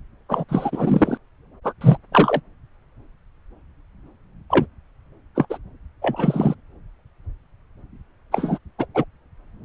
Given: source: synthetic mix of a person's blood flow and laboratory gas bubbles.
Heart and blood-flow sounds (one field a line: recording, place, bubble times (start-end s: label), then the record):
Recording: Doppler ultrasound of blood flow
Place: subclavian vein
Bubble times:
0.29-0.45 s: bubbles
0.49-1.18 s: bubbles
1.64-1.72 s: bubbles
1.80-1.97 s: bubbles
2.12-2.41 s: bubbles
4.50-4.66 s: bubbles
5.35-5.46 s: bubbles
5.50-5.58 s: bubbles
6.02-6.55 s: bubbles
8.31-8.58 s: bubbles
8.78-8.86 s: bubbles
8.94-9.04 s: bubbles
From the record:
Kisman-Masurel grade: 233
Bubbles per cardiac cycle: several, 3 to 8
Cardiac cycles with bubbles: 50 to 99%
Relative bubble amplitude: loud (0.450 to 0.775)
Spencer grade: 3 (all of the cardiac periods contain showers or single bubble signals, but not dominating or overriding the cardiac motion signals)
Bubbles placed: anywhere in the cardiac cycle